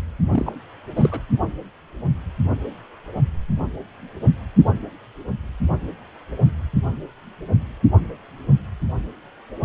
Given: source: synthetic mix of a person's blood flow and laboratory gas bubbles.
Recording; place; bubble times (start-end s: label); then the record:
Doppler ultrasound of blood flow; precordium
0.31-0.55 s: bubbles
0.96-1.20 s: bubbles
From the record:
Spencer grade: 1 (occasional bubble signal discernible with the cardiac motion signal, with majority of cardiac periods free of bubbles); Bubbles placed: only in the low amplitude regions of the cardiac cycle